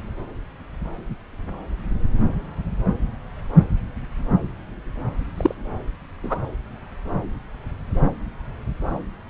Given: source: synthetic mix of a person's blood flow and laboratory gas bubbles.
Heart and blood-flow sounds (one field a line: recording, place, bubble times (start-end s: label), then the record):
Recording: Doppler ultrasound of blood flow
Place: subclavian vein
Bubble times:
5.37-5.54 s: bubbles
6.24-6.39 s: bubbles
From the record:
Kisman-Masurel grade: 113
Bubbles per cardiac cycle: 1 to 2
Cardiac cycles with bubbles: 1 to 10%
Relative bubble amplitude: loud (0.450 to 0.775)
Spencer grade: 1 (occasional bubble signal discernible with the cardiac motion signal, with majority of cardiac periods free of bubbles)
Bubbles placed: anywhere in the cardiac cycle